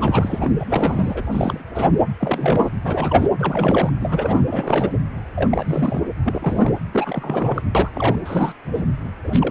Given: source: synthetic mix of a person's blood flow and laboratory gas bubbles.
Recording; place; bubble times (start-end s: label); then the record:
Doppler ultrasound of blood flow; precordium
0.00-0.51 s: bubbles
0.59-0.65 s: bubbles
0.69-1.23 s: bubbles
1.32-1.64 s: bubbles
1.74-1.90 s: bubbles
2.20-2.69 s: bubbles
2.84-3.29 s: bubbles
3.38-3.94 s: bubbles
4.01-4.42 s: bubbles
4.49-4.90 s: bubbles
5.36-6.02 s: bubbles
6.24-6.74 s: bubbles
6.93-7.62 s: bubbles
7.75-7.90 s: bubbles
7.96-8.16 s: bubbles
8.26-8.54 s: bubbles
8.75-8.82 s: bubbles
9.24-9.50 s: bubbles
From the record:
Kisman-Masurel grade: 342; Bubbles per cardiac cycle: rolling drumbeat, 9 or more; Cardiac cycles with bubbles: 100%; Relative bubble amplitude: moderate (0.250 to 0.450); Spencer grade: 3 (all of the cardiac periods contain showers or single bubble signals, but not dominating or overriding the cardiac motion signals); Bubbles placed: anywhere in the cardiac cycle